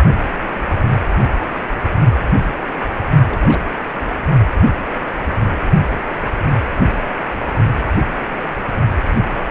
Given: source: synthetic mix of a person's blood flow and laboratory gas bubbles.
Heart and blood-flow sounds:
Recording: Doppler ultrasound of blood flow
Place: precordium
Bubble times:
3.26-3.63 s: bubbles
9.35-9.51 s: bubbles
From the record:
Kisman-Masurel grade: 121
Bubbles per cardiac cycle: 1 to 2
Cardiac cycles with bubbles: 10 to 50%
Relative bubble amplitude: barely perceptible (0.100 to 0.250)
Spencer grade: 2 (many but less than half of the cardiac periods contain bubble signals, singularly or in groups)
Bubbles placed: only in the low amplitude regions of the cardiac cycle

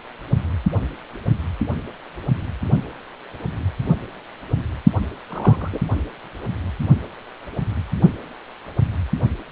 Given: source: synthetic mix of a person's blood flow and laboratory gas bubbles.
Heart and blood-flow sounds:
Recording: Doppler ultrasound of blood flow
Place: precordium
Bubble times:
5.27-5.79 s: bubbles
From the record:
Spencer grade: 1 (occasional bubble signal discernible with the cardiac motion signal, with majority of cardiac periods free of bubbles)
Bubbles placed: only in the low amplitude regions of the cardiac cycle

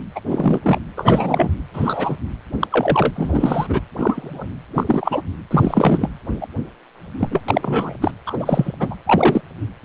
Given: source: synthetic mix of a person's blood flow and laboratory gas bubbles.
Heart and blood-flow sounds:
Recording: Doppler ultrasound of blood flow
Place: precordium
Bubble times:
0.15-0.20 s: bubbles
0.29-0.78 s: bubbles
0.95-1.51 s: bubbles
1.73-2.15 s: bubbles
2.60-2.67 s: bubbles
2.70-3.81 s: bubbles
3.97-4.46 s: bubbles
4.75-4.84 s: bubbles
4.87-5.21 s: bubbles
5.50-6.09 s: bubbles
6.41-6.47 s: bubbles
7.19-7.42 s: bubbles
7.48-7.95 s: bubbles
8.01-8.12 s: bubbles
8.26-8.73 s: bubbles
8.80-8.96 s: bubbles
9.07-9.41 s: bubbles
9.82-9.85 s: bubbles
From the record:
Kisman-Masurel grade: 243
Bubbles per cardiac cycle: several, 3 to 8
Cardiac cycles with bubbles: 100%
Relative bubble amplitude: loud (0.450 to 0.775)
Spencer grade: 3 (all of the cardiac periods contain showers or single bubble signals, but not dominating or overriding the cardiac motion signals)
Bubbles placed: anywhere in the cardiac cycle

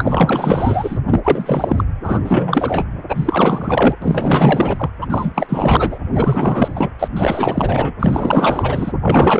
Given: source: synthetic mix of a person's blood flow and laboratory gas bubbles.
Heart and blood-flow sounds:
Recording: Doppler ultrasound of blood flow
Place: precordium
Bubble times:
0.00-0.98 s: bubbles
1.06-1.20 s: bubbles
1.24-1.84 s: bubbles
2.03-2.85 s: bubbles
3.08-3.96 s: bubbles
4.02-4.90 s: bubbles
5.01-5.06 s: bubbles
5.09-5.99 s: bubbles
6.14-6.89 s: bubbles
6.99-7.08 s: bubbles
7.16-7.94 s: bubbles
7.99-8.93 s: bubbles
9.01-9.40 s: bubbles
From the record:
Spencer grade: 4 (maximum detectable bubble signal sounding continuously throughout systole and diastole of every cardiac period, and overriding the amplitude of the normal cardiac signals)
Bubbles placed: anywhere in the cardiac cycle

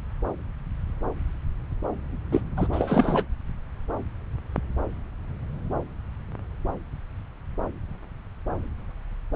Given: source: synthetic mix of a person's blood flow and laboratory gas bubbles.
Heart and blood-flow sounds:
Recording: Doppler ultrasound of blood flow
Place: subclavian vein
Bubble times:
2.32-2.42 s: bubbles
2.57-2.67 s: bubbles
2.72-3.25 s: bubbles
From the record:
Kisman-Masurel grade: 212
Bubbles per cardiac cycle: several, 3 to 8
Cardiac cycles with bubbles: 1 to 10%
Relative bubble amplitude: moderate (0.250 to 0.450)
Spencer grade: 1 (occasional bubble signal discernible with the cardiac motion signal, with majority of cardiac periods free of bubbles)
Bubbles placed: anywhere in the cardiac cycle

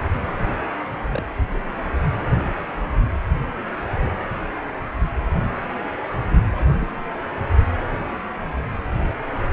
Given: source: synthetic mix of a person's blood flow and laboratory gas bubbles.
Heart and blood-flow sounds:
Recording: Doppler ultrasound of blood flow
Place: precordium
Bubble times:
1.09-1.25 s: bubbles
1.52-1.62 s: bubbles
6.51-6.67 s: bubbles
6.80-6.88 s: bubbles
From the record:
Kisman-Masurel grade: 121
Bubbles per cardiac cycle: 1 to 2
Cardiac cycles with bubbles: 10 to 50%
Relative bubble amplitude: barely perceptible (0.100 to 0.250)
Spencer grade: 2 (many but less than half of the cardiac periods contain bubble signals, singularly or in groups)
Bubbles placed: anywhere in the cardiac cycle

